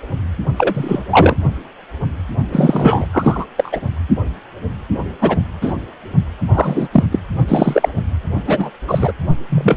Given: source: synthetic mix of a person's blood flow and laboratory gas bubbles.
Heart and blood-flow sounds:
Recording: Doppler ultrasound of blood flow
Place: precordium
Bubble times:
0.56-1.03 s: bubbles
1.11-1.36 s: bubbles
2.52-3.07 s: bubbles
3.12-3.46 s: bubbles
3.57-3.81 s: bubbles
5.21-5.39 s: bubbles
5.62-5.74 s: bubbles
6.54-6.88 s: bubbles
6.92-7.04 s: bubbles
7.11-7.19 s: bubbles
7.47-7.89 s: bubbles
8.46-8.70 s: bubbles
8.88-9.12 s: bubbles
9.49-9.77 s: bubbles
From the record:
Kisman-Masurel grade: 233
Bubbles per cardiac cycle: several, 3 to 8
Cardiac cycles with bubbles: 50 to 99%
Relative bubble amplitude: loud (0.450 to 0.775)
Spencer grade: 3 (all of the cardiac periods contain showers or single bubble signals, but not dominating or overriding the cardiac motion signals)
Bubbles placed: only in the low amplitude regions of the cardiac cycle

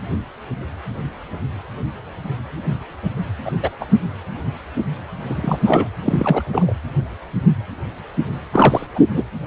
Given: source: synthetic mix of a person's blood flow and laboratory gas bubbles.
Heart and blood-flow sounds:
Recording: Doppler ultrasound of blood flow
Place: precordium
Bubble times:
3.45-3.51 s: bubbles
3.62-3.69 s: bubbles
3.80-3.85 s: bubbles
5.22-5.59 s: bubbles
5.65-5.88 s: bubbles
6.02-6.42 s: bubbles
6.52-6.73 s: bubbles
8.53-8.87 s: bubbles
8.95-9.00 s: bubbles
9.11-9.23 s: bubbles
From the record:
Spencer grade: 2 (many but less than half of the cardiac periods contain bubble signals, singularly or in groups)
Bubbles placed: anywhere in the cardiac cycle

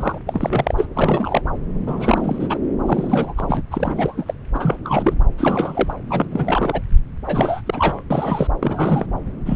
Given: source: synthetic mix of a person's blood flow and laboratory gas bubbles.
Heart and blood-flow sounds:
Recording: Doppler ultrasound of blood flow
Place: subclavian vein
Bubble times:
0.00-0.18 s: bubbles
0.27-0.74 s: bubbles
0.77-0.87 s: bubbles
0.95-1.42 s: bubbles
1.87-2.58 s: bubbles
2.85-3.33 s: bubbles
3.37-3.62 s: bubbles
3.71-4.34 s: bubbles
4.54-4.77 s: bubbles
4.84-5.14 s: bubbles
5.38-5.94 s: bubbles
6.09-6.29 s: bubbles
6.32-6.81 s: bubbles
7.26-7.61 s: bubbles
7.66-8.03 s: bubbles
8.10-8.47 s: bubbles
8.62-9.06 s: bubbles
9.46-9.56 s: bubbles
From the record:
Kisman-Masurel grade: 332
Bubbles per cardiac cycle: rolling drumbeat, 9 or more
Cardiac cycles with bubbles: 50 to 99%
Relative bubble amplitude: moderate (0.250 to 0.450)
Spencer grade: 3 (all of the cardiac periods contain showers or single bubble signals, but not dominating or overriding the cardiac motion signals)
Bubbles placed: anywhere in the cardiac cycle

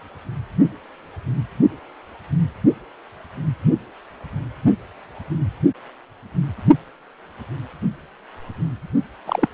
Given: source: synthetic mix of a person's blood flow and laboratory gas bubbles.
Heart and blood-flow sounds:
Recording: Doppler ultrasound of blood flow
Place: precordium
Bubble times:
9.25-9.48 s: bubbles
From the record:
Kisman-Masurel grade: 112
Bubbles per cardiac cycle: 1 to 2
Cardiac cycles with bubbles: 1 to 10%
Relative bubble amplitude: moderate (0.250 to 0.450)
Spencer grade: 1 (occasional bubble signal discernible with the cardiac motion signal, with majority of cardiac periods free of bubbles)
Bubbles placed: only in the low amplitude regions of the cardiac cycle

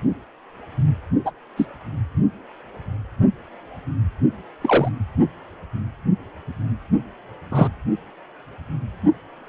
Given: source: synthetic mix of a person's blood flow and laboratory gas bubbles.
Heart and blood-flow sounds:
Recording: Doppler ultrasound of blood flow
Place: precordium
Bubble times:
1.25-1.30 s: bubbles
1.57-1.66 s: bubbles
4.61-4.89 s: bubbles
7.50-7.68 s: bubbles
From the record:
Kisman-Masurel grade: 123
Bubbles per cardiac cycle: 1 to 2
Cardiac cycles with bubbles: 10 to 50%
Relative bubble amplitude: loud (0.450 to 0.775)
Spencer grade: 2 (many but less than half of the cardiac periods contain bubble signals, singularly or in groups)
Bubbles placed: anywhere in the cardiac cycle

